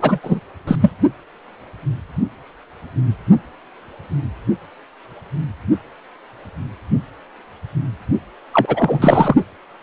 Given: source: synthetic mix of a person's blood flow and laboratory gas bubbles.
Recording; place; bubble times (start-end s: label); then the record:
Doppler ultrasound of blood flow; precordium
0.00-0.19 s: bubbles
0.23-0.39 s: bubbles
0.67-0.76 s: bubbles
0.82-0.91 s: bubbles
8.53-9.36 s: bubbles
From the record:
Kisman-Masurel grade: 223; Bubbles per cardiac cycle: several, 3 to 8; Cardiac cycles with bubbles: 10 to 50%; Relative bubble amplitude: loud (0.450 to 0.775); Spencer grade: 2 (many but less than half of the cardiac periods contain bubble signals, singularly or in groups); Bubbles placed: only in the low amplitude regions of the cardiac cycle